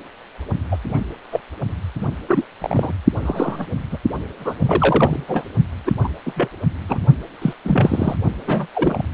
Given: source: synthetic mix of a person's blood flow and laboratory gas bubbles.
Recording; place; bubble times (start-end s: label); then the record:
Doppler ultrasound of blood flow; precordium
0.71-0.77 s: bubbles
0.89-1.01 s: bubbles
1.32-1.41 s: bubbles
2.01-2.07 s: bubbles
2.28-2.44 s: bubbles
2.61-2.92 s: bubbles
3.21-3.65 s: bubbles
3.91-3.98 s: bubbles
4.39-4.54 s: bubbles
4.60-5.24 s: bubbles
5.27-5.44 s: bubbles
5.86-5.92 s: bubbles
6.04-6.08 s: bubbles
6.25-6.32 s: bubbles
6.36-6.49 s: bubbles
6.89-6.99 s: bubbles
7.42-7.54 s: bubbles
7.64-8.15 s: bubbles
8.46-8.67 s: bubbles
8.75-9.03 s: bubbles
From the record:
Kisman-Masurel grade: 242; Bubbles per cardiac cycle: several, 3 to 8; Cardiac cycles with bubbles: 100%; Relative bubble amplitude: moderate (0.250 to 0.450); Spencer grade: 3 (all of the cardiac periods contain showers or single bubble signals, but not dominating or overriding the cardiac motion signals); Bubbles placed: only in the low amplitude regions of the cardiac cycle